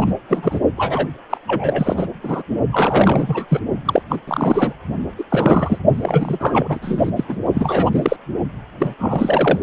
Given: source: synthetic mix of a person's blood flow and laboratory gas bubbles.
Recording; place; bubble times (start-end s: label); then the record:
Doppler ultrasound of blood flow; precordium
0.01-0.13 s: bubbles
0.28-0.60 s: bubbles
0.77-1.08 s: bubbles
1.30-1.38 s: bubbles
1.47-2.07 s: bubbles
2.23-2.42 s: bubbles
2.73-3.46 s: bubbles
3.48-3.60 s: bubbles
3.85-4.02 s: bubbles
4.09-4.17 s: bubbles
4.28-4.74 s: bubbles
5.18-5.24 s: bubbles
5.30-5.79 s: bubbles
5.94-7.11 s: bubbles
7.16-7.24 s: bubbles
7.29-7.37 s: bubbles
7.54-7.90 s: bubbles
7.93-8.17 s: bubbles
8.79-8.94 s: bubbles
8.98-9.59 s: bubbles
From the record:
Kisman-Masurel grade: 343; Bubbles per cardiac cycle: rolling drumbeat, 9 or more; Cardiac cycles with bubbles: 100%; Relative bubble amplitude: loud (0.450 to 0.775); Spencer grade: 3 (all of the cardiac periods contain showers or single bubble signals, but not dominating or overriding the cardiac motion signals); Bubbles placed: only in the low amplitude regions of the cardiac cycle